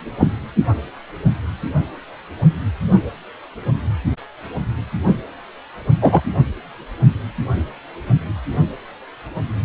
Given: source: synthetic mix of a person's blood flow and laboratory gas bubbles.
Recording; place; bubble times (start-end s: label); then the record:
Doppler ultrasound of blood flow; precordium
0.19-0.28 s: bubbles
6.00-6.21 s: bubbles
From the record:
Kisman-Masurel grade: 123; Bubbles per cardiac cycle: 1 to 2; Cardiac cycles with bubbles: 10 to 50%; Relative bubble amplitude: loud (0.450 to 0.775); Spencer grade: 2 (many but less than half of the cardiac periods contain bubble signals, singularly or in groups); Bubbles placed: only in the low amplitude regions of the cardiac cycle